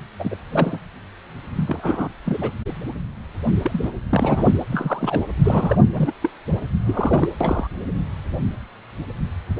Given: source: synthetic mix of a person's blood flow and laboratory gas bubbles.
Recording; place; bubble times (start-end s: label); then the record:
Doppler ultrasound of blood flow; precordium
0.19-0.36 s: bubbles
0.52-0.79 s: bubbles
1.56-2.08 s: bubbles
2.25-2.51 s: bubbles
3.63-3.90 s: bubbles
4.09-4.51 s: bubbles
4.71-5.24 s: bubbles
5.43-5.76 s: bubbles
5.92-6.12 s: bubbles
6.22-6.29 s: bubbles
6.86-7.28 s: bubbles
7.40-7.67 s: bubbles
From the record:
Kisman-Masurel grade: 232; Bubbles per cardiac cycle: several, 3 to 8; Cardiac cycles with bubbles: 50 to 99%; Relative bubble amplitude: moderate (0.250 to 0.450); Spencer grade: 3 (all of the cardiac periods contain showers or single bubble signals, but not dominating or overriding the cardiac motion signals); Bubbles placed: anywhere in the cardiac cycle